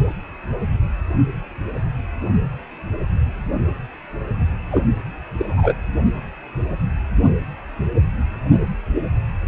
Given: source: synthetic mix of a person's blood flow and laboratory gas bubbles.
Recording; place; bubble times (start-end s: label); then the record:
Doppler ultrasound of blood flow; precordium
4.71-4.83 s: bubbles
5.38-5.74 s: bubbles
From the record:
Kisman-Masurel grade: 112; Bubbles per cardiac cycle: 1 to 2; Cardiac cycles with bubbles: 1 to 10%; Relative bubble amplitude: moderate (0.250 to 0.450); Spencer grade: 1 (occasional bubble signal discernible with the cardiac motion signal, with majority of cardiac periods free of bubbles); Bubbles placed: anywhere in the cardiac cycle